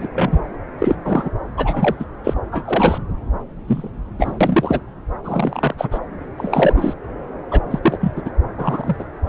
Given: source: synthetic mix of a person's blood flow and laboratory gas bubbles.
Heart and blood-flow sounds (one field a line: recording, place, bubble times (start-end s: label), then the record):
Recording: Doppler ultrasound of blood flow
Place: subclavian vein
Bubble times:
0.00-0.09 s: bubbles
0.14-0.51 s: bubbles
0.79-0.95 s: bubbles
1.05-1.29 s: bubbles
1.57-1.95 s: bubbles
1.99-2.04 s: bubbles
2.24-2.33 s: bubbles
2.51-2.98 s: bubbles
3.67-3.90 s: bubbles
4.18-4.81 s: bubbles
5.24-5.74 s: bubbles
5.77-5.98 s: bubbles
6.38-6.73 s: bubbles
6.76-6.93 s: bubbles
7.51-7.60 s: bubbles
7.70-7.79 s: bubbles
7.83-7.98 s: bubbles
8.01-8.12 s: bubbles
8.16-8.22 s: bubbles
8.25-8.30 s: bubbles
8.58-9.04 s: bubbles
9.26-9.29 s: bubbles
From the record:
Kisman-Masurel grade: 243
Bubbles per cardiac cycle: several, 3 to 8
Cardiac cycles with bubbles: 100%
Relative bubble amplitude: loud (0.450 to 0.775)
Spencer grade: 3 (all of the cardiac periods contain showers or single bubble signals, but not dominating or overriding the cardiac motion signals)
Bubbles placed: anywhere in the cardiac cycle